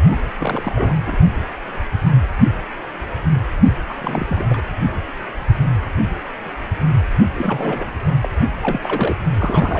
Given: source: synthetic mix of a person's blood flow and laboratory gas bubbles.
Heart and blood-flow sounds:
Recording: Doppler ultrasound of blood flow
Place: precordium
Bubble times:
0.05-0.20 s: bubbles
0.38-0.95 s: bubbles
1.06-1.17 s: bubbles
3.89-3.94 s: bubbles
3.99-4.61 s: bubbles
7.34-7.92 s: bubbles
8.22-8.30 s: bubbles
8.62-9.16 s: bubbles
9.38-9.79 s: bubbles
From the record:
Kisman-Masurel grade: 332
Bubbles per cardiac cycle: rolling drumbeat, 9 or more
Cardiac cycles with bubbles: 50 to 99%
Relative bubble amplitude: moderate (0.250 to 0.450)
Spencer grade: 3 (all of the cardiac periods contain showers or single bubble signals, but not dominating or overriding the cardiac motion signals)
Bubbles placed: anywhere in the cardiac cycle

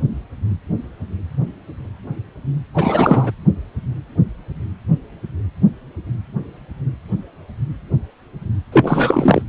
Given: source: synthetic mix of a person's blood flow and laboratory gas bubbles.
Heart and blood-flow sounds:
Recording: Doppler ultrasound of blood flow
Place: precordium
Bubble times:
2.75-3.31 s: bubbles
8.72-9.42 s: bubbles
From the record:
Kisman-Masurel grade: 223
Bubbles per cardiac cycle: several, 3 to 8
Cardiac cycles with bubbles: 10 to 50%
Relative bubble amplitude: loud (0.450 to 0.775)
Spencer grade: 2 (many but less than half of the cardiac periods contain bubble signals, singularly or in groups)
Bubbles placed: anywhere in the cardiac cycle

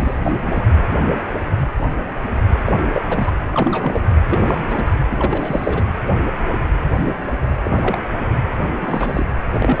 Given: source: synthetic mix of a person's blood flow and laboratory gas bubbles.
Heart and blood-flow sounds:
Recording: Doppler ultrasound of blood flow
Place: precordium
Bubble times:
0.00-0.18 s: bubbles
0.23-0.42 s: bubbles
0.46-0.67 s: bubbles
2.65-2.77 s: bubbles
2.93-3.02 s: bubbles
3.08-3.32 s: bubbles
3.52-4.01 s: bubbles
4.28-4.83 s: bubbles
4.86-4.94 s: bubbles
5.11-5.84 s: bubbles
7.64-7.99 s: bubbles
8.81-9.27 s: bubbles
9.52-9.80 s: bubbles
From the record:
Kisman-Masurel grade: 232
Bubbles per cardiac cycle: several, 3 to 8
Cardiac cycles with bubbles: 50 to 99%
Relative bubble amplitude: moderate (0.250 to 0.450)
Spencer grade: 3 (all of the cardiac periods contain showers or single bubble signals, but not dominating or overriding the cardiac motion signals)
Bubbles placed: anywhere in the cardiac cycle

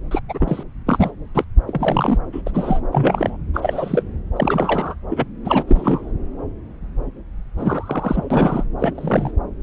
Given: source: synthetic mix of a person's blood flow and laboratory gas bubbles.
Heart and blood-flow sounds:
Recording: Doppler ultrasound of blood flow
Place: subclavian vein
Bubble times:
0.11-0.20 s: bubbles
0.28-0.63 s: bubbles
0.86-1.11 s: bubbles
1.34-1.44 s: bubbles
1.67-2.19 s: bubbles
2.32-2.42 s: bubbles
2.46-2.51 s: bubbles
2.54-2.80 s: bubbles
2.92-3.38 s: bubbles
3.54-4.03 s: bubbles
4.35-4.95 s: bubbles
5.09-5.25 s: bubbles
5.45-5.63 s: bubbles
5.67-6.12 s: bubbles
7.57-8.64 s: bubbles
8.79-9.31 s: bubbles
From the record:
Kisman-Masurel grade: 232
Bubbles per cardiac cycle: several, 3 to 8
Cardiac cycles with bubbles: 50 to 99%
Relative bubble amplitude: moderate (0.250 to 0.450)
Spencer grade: 3 (all of the cardiac periods contain showers or single bubble signals, but not dominating or overriding the cardiac motion signals)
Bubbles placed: anywhere in the cardiac cycle

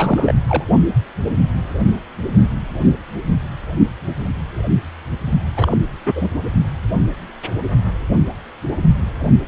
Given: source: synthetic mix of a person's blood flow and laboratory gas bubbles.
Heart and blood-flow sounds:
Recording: Doppler ultrasound of blood flow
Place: precordium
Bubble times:
0.00-0.35 s: bubbles
0.48-0.65 s: bubbles
5.56-5.75 s: bubbles
6.05-6.29 s: bubbles
From the record:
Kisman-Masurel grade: 222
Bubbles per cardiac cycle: several, 3 to 8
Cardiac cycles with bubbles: 10 to 50%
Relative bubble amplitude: moderate (0.250 to 0.450)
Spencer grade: 2 (many but less than half of the cardiac periods contain bubble signals, singularly or in groups)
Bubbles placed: only in the low amplitude regions of the cardiac cycle

